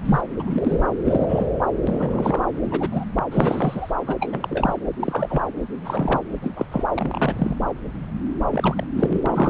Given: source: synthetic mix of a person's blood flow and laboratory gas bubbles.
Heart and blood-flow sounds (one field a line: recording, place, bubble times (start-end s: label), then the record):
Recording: Doppler ultrasound of blood flow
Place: subclavian vein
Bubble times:
0.05-0.21 s: bubbles
0.39-0.86 s: bubbles
1.05-1.46 s: bubbles
1.87-2.42 s: bubbles
2.63-3.04 s: bubbles
3.31-3.92 s: bubbles
4.07-4.16 s: bubbles
4.20-4.73 s: bubbles
4.99-5.42 s: bubbles
5.79-6.21 s: bubbles
6.42-6.51 s: bubbles
6.56-6.65 s: bubbles
6.71-6.84 s: bubbles
6.96-7.56 s: bubbles
8.50-8.84 s: bubbles
8.96-9.20 s: bubbles
9.25-9.50 s: bubbles
From the record:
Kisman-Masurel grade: 242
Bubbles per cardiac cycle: several, 3 to 8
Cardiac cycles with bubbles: 100%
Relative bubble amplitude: moderate (0.250 to 0.450)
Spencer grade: 3 (all of the cardiac periods contain showers or single bubble signals, but not dominating or overriding the cardiac motion signals)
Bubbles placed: anywhere in the cardiac cycle